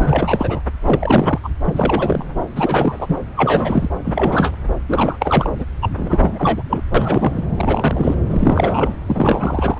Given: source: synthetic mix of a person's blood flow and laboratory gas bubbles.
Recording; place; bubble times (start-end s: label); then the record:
Doppler ultrasound of blood flow; subclavian vein
0.00-0.61 s: bubbles
0.82-1.40 s: bubbles
1.43-1.49 s: bubbles
1.66-2.24 s: bubbles
2.56-3.17 s: bubbles
3.36-3.89 s: bubbles
4.04-4.51 s: bubbles
4.88-5.50 s: bubbles
5.56-5.64 s: bubbles
5.82-5.89 s: bubbles
5.96-6.62 s: bubbles
6.69-6.81 s: bubbles
6.94-7.44 s: bubbles
7.56-8.14 s: bubbles
8.29-8.94 s: bubbles
9.06-9.78 s: bubbles
From the record:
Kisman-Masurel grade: 343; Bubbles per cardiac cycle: rolling drumbeat, 9 or more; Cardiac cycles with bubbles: 100%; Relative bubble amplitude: loud (0.450 to 0.775); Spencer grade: 3 (all of the cardiac periods contain showers or single bubble signals, but not dominating or overriding the cardiac motion signals); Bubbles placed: anywhere in the cardiac cycle